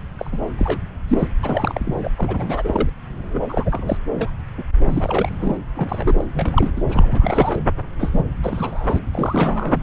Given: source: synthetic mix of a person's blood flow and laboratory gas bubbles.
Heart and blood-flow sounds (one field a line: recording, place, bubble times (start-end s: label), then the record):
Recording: Doppler ultrasound of blood flow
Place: subclavian vein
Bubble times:
0.19-0.40 s: bubbles
0.58-0.82 s: bubbles
1.07-1.28 s: bubbles
1.43-1.94 s: bubbles
2.03-2.10 s: bubbles
2.18-2.90 s: bubbles
3.29-3.97 s: bubbles
4.17-4.30 s: bubbles
4.58-4.63 s: bubbles
4.80-5.58 s: bubbles
5.75-6.25 s: bubbles
6.33-6.71 s: bubbles
6.76-6.83 s: bubbles
6.90-7.61 s: bubbles
7.98-8.23 s: bubbles
8.42-8.99 s: bubbles
9.12-9.83 s: bubbles
From the record:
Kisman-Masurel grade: 342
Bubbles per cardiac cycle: rolling drumbeat, 9 or more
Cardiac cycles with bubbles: 100%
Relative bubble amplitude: moderate (0.250 to 0.450)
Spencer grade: 3 (all of the cardiac periods contain showers or single bubble signals, but not dominating or overriding the cardiac motion signals)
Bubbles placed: anywhere in the cardiac cycle